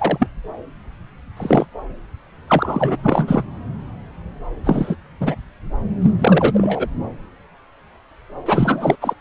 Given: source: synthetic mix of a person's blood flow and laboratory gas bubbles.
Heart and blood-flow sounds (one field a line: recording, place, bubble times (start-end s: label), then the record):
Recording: Doppler ultrasound of blood flow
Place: subclavian vein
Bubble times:
0.00-0.28 s: bubbles
1.36-1.66 s: bubbles
2.48-2.96 s: bubbles
3.02-3.44 s: bubbles
4.63-4.96 s: bubbles
5.21-5.36 s: bubbles
6.01-6.11 s: bubbles
6.18-6.51 s: bubbles
6.54-6.88 s: bubbles
8.46-8.96 s: bubbles
9.01-9.13 s: bubbles
From the record:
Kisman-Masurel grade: 233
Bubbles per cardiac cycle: several, 3 to 8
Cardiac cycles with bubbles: 50 to 99%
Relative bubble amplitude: loud (0.450 to 0.775)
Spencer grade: 3 (all of the cardiac periods contain showers or single bubble signals, but not dominating or overriding the cardiac motion signals)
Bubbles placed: anywhere in the cardiac cycle